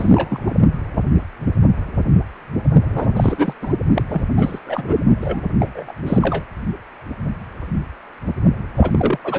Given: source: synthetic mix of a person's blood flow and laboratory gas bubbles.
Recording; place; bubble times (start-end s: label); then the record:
Doppler ultrasound of blood flow; precordium
0.00-0.65 s: bubbles
2.83-3.53 s: bubbles
3.61-3.73 s: bubbles
3.94-4.04 s: bubbles
4.09-4.24 s: bubbles
4.37-4.59 s: bubbles
4.66-4.96 s: bubbles
5.21-5.44 s: bubbles
5.59-5.93 s: bubbles
6.05-6.44 s: bubbles
8.75-9.18 s: bubbles
9.23-9.39 s: bubbles
From the record:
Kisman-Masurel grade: 333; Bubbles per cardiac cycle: rolling drumbeat, 9 or more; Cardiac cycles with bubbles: 50 to 99%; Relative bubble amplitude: loud (0.450 to 0.775); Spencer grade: 3 (all of the cardiac periods contain showers or single bubble signals, but not dominating or overriding the cardiac motion signals); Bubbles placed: only in the low amplitude regions of the cardiac cycle